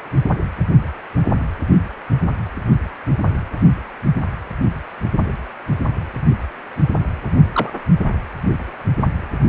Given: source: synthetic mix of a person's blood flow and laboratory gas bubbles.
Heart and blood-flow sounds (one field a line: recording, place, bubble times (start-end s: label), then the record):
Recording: Doppler ultrasound of blood flow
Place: precordium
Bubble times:
7.53-7.70 s: bubbles
From the record:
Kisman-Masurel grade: 123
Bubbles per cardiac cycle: 1 to 2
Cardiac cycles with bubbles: 10 to 50%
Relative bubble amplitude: loud (0.450 to 0.775)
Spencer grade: 2 (many but less than half of the cardiac periods contain bubble signals, singularly or in groups)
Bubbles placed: only in the low amplitude regions of the cardiac cycle